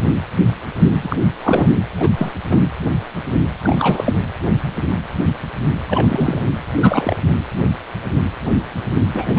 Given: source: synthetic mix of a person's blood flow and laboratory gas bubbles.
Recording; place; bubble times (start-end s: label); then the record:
Doppler ultrasound of blood flow; precordium
1.02-1.17 s: bubbles
1.42-1.75 s: bubbles
2.00-2.10 s: bubbles
2.18-2.32 s: bubbles
2.50-2.61 s: bubbles
3.63-4.14 s: bubbles
5.87-6.45 s: bubbles
6.82-7.17 s: bubbles
9.13-9.39 s: bubbles
From the record:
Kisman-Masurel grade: 233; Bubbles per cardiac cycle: several, 3 to 8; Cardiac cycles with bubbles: 50 to 99%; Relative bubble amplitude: loud (0.450 to 0.775); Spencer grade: 3 (all of the cardiac periods contain showers or single bubble signals, but not dominating or overriding the cardiac motion signals); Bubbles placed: anywhere in the cardiac cycle